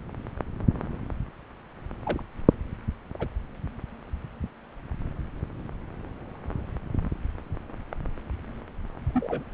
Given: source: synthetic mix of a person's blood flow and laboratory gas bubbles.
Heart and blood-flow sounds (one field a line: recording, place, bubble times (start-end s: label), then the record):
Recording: Doppler ultrasound of blood flow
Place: subclavian vein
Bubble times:
2.05-2.22 s: bubbles
3.19-3.28 s: bubbles
9.13-9.44 s: bubbles
From the record:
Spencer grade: 2 (many but less than half of the cardiac periods contain bubble signals, singularly or in groups)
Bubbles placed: anywhere in the cardiac cycle